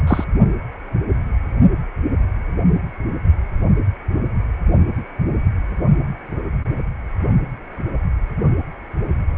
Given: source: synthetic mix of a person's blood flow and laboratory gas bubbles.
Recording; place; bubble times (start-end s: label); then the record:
Doppler ultrasound of blood flow; precordium
0.07-0.24 s: bubbles
From the record:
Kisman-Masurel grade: 213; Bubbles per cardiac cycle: several, 3 to 8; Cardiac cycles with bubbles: 1 to 10%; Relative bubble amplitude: loud (0.450 to 0.775); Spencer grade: 1 (occasional bubble signal discernible with the cardiac motion signal, with majority of cardiac periods free of bubbles); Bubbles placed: only in the low amplitude regions of the cardiac cycle